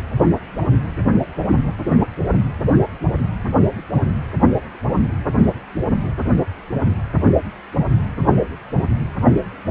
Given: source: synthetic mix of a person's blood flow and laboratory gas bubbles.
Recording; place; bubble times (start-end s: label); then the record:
Doppler ultrasound of blood flow; precordium
no bubbles
From the record:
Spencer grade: 0 (complete lack of bubble signals)